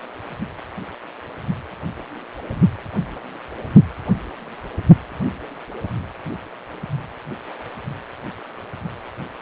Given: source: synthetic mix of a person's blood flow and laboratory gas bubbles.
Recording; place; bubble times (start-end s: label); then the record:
Doppler ultrasound of blood flow; precordium
no bubbles
From the record:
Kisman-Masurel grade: 000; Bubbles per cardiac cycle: 0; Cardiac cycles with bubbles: 0%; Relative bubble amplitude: no bubbles discernible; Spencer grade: 0 (complete lack of bubble signals)